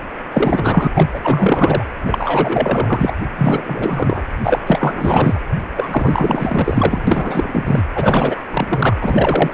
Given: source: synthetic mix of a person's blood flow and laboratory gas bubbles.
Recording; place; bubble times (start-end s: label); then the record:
Doppler ultrasound of blood flow; precordium
0.33-0.88 s: bubbles
0.95-1.10 s: bubbles
1.14-1.21 s: bubbles
1.24-1.85 s: bubbles
2.07-3.12 s: bubbles
3.38-4.24 s: bubbles
4.43-4.63 s: bubbles
4.67-5.41 s: bubbles
5.75-7.03 s: bubbles
7.07-7.87 s: bubbles
7.95-8.41 s: bubbles
8.51-8.96 s: bubbles
9.01-9.54 s: bubbles
From the record:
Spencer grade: 4 (maximum detectable bubble signal sounding continuously throughout systole and diastole of every cardiac period, and overriding the amplitude of the normal cardiac signals); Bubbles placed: anywhere in the cardiac cycle